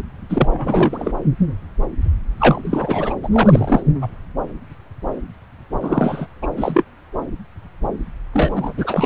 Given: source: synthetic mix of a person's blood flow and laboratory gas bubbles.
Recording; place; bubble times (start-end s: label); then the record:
Doppler ultrasound of blood flow; subclavian vein
0.29-1.12 s: bubbles
2.39-2.61 s: bubbles
2.65-3.15 s: bubbles
3.23-3.29 s: bubbles
3.31-3.82 s: bubbles
4.01-4.07 s: bubbles
5.80-6.27 s: bubbles
6.42-6.48 s: bubbles
6.57-6.83 s: bubbles
8.33-8.73 s: bubbles
8.77-9.06 s: bubbles
From the record:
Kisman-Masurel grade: 333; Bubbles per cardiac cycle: rolling drumbeat, 9 or more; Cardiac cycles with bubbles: 50 to 99%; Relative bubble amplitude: loud (0.450 to 0.775); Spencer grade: 3 (all of the cardiac periods contain showers or single bubble signals, but not dominating or overriding the cardiac motion signals); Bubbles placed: anywhere in the cardiac cycle